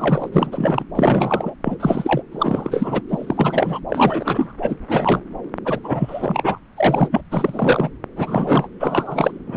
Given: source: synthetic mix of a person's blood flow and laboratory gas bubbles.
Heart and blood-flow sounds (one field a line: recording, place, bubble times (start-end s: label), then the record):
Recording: Doppler ultrasound of blood flow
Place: subclavian vein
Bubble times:
0.00-0.29 s: bubbles
0.32-0.83 s: bubbles
0.95-1.54 s: bubbles
1.64-1.76 s: bubbles
1.80-2.22 s: bubbles
2.31-3.02 s: bubbles
3.09-3.79 s: bubbles
3.88-4.53 s: bubbles
4.60-4.76 s: bubbles
4.88-5.21 s: bubbles
5.65-5.79 s: bubbles
5.83-6.59 s: bubbles
6.77-7.08 s: bubbles
7.12-7.21 s: bubbles
7.30-7.89 s: bubbles
8.16-8.68 s: bubbles
8.80-9.38 s: bubbles
9.47-9.57 s: bubbles
From the record:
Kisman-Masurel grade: 343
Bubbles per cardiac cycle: rolling drumbeat, 9 or more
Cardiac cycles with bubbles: 100%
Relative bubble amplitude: loud (0.450 to 0.775)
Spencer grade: 3 (all of the cardiac periods contain showers or single bubble signals, but not dominating or overriding the cardiac motion signals)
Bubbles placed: anywhere in the cardiac cycle